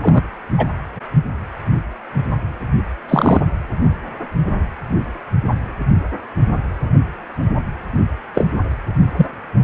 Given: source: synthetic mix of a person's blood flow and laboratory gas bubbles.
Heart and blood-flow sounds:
Doppler ultrasound of blood flow; precordium
0.02-0.21 s: bubbles
0.57-0.66 s: bubbles
3.08-3.41 s: bubbles
8.34-8.47 s: bubbles
9.17-9.27 s: bubbles
From the record:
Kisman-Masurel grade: 123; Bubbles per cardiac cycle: 1 to 2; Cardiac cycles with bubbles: 10 to 50%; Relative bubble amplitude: loud (0.450 to 0.775); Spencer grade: 2 (many but less than half of the cardiac periods contain bubble signals, singularly or in groups); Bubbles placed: anywhere in the cardiac cycle

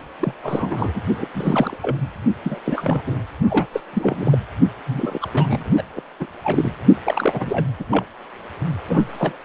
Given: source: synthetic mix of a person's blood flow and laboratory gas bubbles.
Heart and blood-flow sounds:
Doppler ultrasound of blood flow; precordium
0.20-0.34 s: bubbles
0.42-1.02 s: bubbles
1.16-1.26 s: bubbles
1.33-1.77 s: bubbles
1.81-1.96 s: bubbles
2.44-2.59 s: bubbles
2.64-3.02 s: bubbles
3.06-3.21 s: bubbles
3.50-3.67 s: bubbles
3.73-3.81 s: bubbles
3.93-4.38 s: bubbles
4.86-5.29 s: bubbles
5.33-5.71 s: bubbles
5.76-5.83 s: bubbles
5.96-6.02 s: bubbles
6.20-6.28 s: bubbles
6.43-6.75 s: bubbles
7.05-7.66 s: bubbles
7.79-7.84 s: bubbles
7.90-8.05 s: bubbles
8.88-9.05 s: bubbles
9.17-9.36 s: bubbles
From the record:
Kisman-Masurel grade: 342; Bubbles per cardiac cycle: rolling drumbeat, 9 or more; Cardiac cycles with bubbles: 100%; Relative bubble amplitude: moderate (0.250 to 0.450); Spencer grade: 3 (all of the cardiac periods contain showers or single bubble signals, but not dominating or overriding the cardiac motion signals); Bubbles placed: only in the low amplitude regions of the cardiac cycle

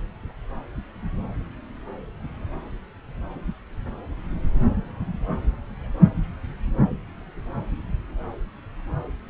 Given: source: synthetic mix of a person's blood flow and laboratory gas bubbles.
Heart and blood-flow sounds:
Doppler ultrasound of blood flow; subclavian vein
no bubbles
From the record:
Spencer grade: 0 (complete lack of bubble signals)

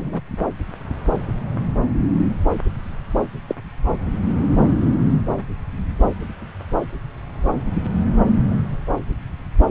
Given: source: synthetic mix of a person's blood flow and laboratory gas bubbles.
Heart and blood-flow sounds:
Doppler ultrasound of blood flow; subclavian vein
0.00-0.20 s: bubbles
3.48-3.55 s: bubbles
From the record:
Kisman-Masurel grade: 112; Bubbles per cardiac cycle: 1 to 2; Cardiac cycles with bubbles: 1 to 10%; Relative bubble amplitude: moderate (0.250 to 0.450); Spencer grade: 1 (occasional bubble signal discernible with the cardiac motion signal, with majority of cardiac periods free of bubbles); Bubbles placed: anywhere in the cardiac cycle

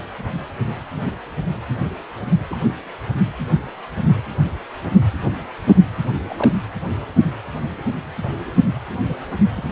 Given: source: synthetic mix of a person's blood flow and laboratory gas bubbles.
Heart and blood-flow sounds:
Doppler ultrasound of blood flow; precordium
2.50-2.56 s: bubbles
6.29-6.53 s: bubbles
9.50-9.72 s: bubbles
From the record:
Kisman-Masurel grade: 121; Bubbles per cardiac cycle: 1 to 2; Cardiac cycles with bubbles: 10 to 50%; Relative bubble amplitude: barely perceptible (0.100 to 0.250); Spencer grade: 2 (many but less than half of the cardiac periods contain bubble signals, singularly or in groups); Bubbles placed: anywhere in the cardiac cycle

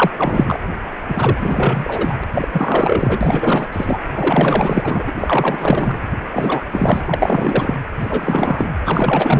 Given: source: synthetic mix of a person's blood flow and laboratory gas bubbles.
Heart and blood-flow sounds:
Doppler ultrasound of blood flow; precordium
0.00-0.11 s: bubbles
0.17-0.60 s: bubbles
1.08-2.17 s: bubbles
2.20-2.24 s: bubbles
2.33-2.48 s: bubbles
2.52-3.68 s: bubbles
3.72-4.00 s: bubbles
4.15-5.03 s: bubbles
5.07-5.12 s: bubbles
5.17-5.99 s: bubbles
6.31-6.63 s: bubbles
6.70-7.01 s: bubbles
7.05-7.75 s: bubbles
8.01-8.68 s: bubbles
8.84-9.40 s: bubbles
From the record:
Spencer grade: 4 (maximum detectable bubble signal sounding continuously throughout systole and diastole of every cardiac period, and overriding the amplitude of the normal cardiac signals); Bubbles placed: anywhere in the cardiac cycle

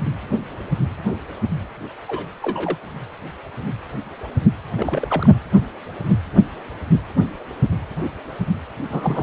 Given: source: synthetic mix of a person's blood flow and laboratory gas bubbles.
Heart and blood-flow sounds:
Doppler ultrasound of blood flow; precordium
2.08-2.26 s: bubbles
2.42-2.78 s: bubbles
4.69-5.32 s: bubbles
8.89-9.23 s: bubbles
From the record:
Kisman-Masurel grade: 222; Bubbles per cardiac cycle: several, 3 to 8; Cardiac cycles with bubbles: 10 to 50%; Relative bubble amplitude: moderate (0.250 to 0.450); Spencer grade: 2 (many but less than half of the cardiac periods contain bubble signals, singularly or in groups); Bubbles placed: anywhere in the cardiac cycle

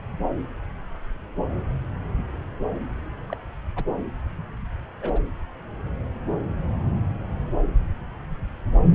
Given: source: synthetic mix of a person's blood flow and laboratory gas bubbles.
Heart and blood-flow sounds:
Doppler ultrasound of blood flow; subclavian vein
3.28-3.37 s: bubbles
3.76-3.84 s: bubbles
5.01-5.19 s: bubbles
From the record:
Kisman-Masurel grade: 121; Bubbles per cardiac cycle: 1 to 2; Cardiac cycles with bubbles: 10 to 50%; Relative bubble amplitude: barely perceptible (0.100 to 0.250); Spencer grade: 2 (many but less than half of the cardiac periods contain bubble signals, singularly or in groups); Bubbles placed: anywhere in the cardiac cycle

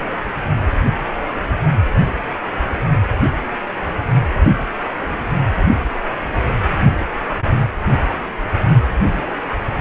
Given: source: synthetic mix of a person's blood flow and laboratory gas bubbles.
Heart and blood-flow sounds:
Doppler ultrasound of blood flow; precordium
0.00-0.13 s: bubbles
From the record:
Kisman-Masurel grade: 221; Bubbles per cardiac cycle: several, 3 to 8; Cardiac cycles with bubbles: 10 to 50%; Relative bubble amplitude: barely perceptible (0.100 to 0.250); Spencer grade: 2 (many but less than half of the cardiac periods contain bubble signals, singularly or in groups); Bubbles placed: only in the low amplitude regions of the cardiac cycle

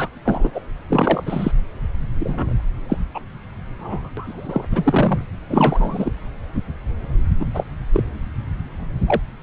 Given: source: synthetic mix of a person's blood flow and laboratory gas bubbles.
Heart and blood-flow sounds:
Doppler ultrasound of blood flow; subclavian vein
0.00-0.08 s: bubbles
0.25-0.50 s: bubbles
0.54-0.61 s: bubbles
0.89-1.52 s: bubbles
2.19-2.55 s: bubbles
2.88-2.97 s: bubbles
3.14-3.20 s: bubbles
3.79-4.10 s: bubbles
4.17-4.65 s: bubbles
4.71-5.21 s: bubbles
5.50-6.11 s: bubbles
7.39-7.46 s: bubbles
7.54-7.64 s: bubbles
7.93-8.03 s: bubbles
9.07-9.21 s: bubbles
From the record:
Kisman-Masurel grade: 243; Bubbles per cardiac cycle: several, 3 to 8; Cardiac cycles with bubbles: 100%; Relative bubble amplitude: loud (0.450 to 0.775); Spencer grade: 3 (all of the cardiac periods contain showers or single bubble signals, but not dominating or overriding the cardiac motion signals); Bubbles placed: anywhere in the cardiac cycle

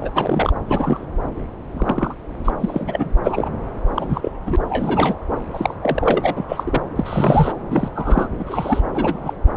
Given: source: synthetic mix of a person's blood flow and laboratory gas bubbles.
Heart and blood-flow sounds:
Doppler ultrasound of blood flow; subclavian vein
0.00-0.52 s: bubbles
0.67-1.06 s: bubbles
1.74-2.15 s: bubbles
2.44-2.50 s: bubbles
2.60-3.09 s: bubbles
3.23-3.50 s: bubbles
3.96-4.31 s: bubbles
4.45-4.56 s: bubbles
4.69-5.16 s: bubbles
5.53-5.75 s: bubbles
5.82-6.45 s: bubbles
6.48-6.81 s: bubbles
6.96-7.52 s: bubbles
7.70-7.88 s: bubbles
7.95-8.28 s: bubbles
8.38-8.81 s: bubbles
8.94-9.33 s: bubbles
From the record:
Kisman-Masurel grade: 242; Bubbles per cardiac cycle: several, 3 to 8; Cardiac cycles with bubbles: 100%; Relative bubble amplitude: moderate (0.250 to 0.450); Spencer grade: 3 (all of the cardiac periods contain showers or single bubble signals, but not dominating or overriding the cardiac motion signals); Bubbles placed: anywhere in the cardiac cycle

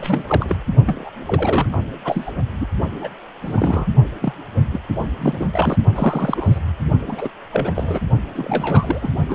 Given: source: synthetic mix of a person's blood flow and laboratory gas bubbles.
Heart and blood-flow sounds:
Doppler ultrasound of blood flow; precordium
0.00-0.24 s: bubbles
0.28-0.57 s: bubbles
0.84-1.10 s: bubbles
1.26-1.78 s: bubbles
2.04-2.32 s: bubbles
2.60-2.67 s: bubbles
2.99-3.10 s: bubbles
3.42-3.87 s: bubbles
4.21-4.33 s: bubbles
4.72-4.80 s: bubbles
5.18-5.46 s: bubbles
5.52-5.75 s: bubbles
5.95-6.59 s: bubbles
7.07-7.29 s: bubbles
7.52-7.71 s: bubbles
7.75-8.00 s: bubbles
8.35-9.12 s: bubbles
9.28-9.35 s: bubbles
From the record:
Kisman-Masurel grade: 342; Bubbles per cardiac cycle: rolling drumbeat, 9 or more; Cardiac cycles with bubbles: 100%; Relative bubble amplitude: moderate (0.250 to 0.450); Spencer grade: 3 (all of the cardiac periods contain showers or single bubble signals, but not dominating or overriding the cardiac motion signals); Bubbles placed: only in the low amplitude regions of the cardiac cycle

